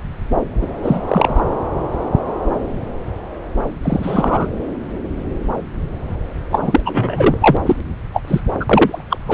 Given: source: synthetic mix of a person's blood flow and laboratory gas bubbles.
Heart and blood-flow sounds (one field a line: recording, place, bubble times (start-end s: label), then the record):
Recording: Doppler ultrasound of blood flow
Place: subclavian vein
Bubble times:
0.61-0.67 s: bubbles
0.83-1.00 s: bubbles
1.08-1.44 s: bubbles
3.82-4.48 s: bubbles
6.50-6.59 s: bubbles
6.62-6.81 s: bubbles
6.86-7.38 s: bubbles
7.40-7.57 s: bubbles
7.66-7.76 s: bubbles
8.13-8.22 s: bubbles
8.27-8.41 s: bubbles
8.60-8.65 s: bubbles
8.69-9.04 s: bubbles
9.10-9.17 s: bubbles
9.26-9.34 s: bubbles
From the record:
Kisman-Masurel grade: 233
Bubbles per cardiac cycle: several, 3 to 8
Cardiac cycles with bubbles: 50 to 99%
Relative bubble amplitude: loud (0.450 to 0.775)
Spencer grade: 3 (all of the cardiac periods contain showers or single bubble signals, but not dominating or overriding the cardiac motion signals)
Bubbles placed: anywhere in the cardiac cycle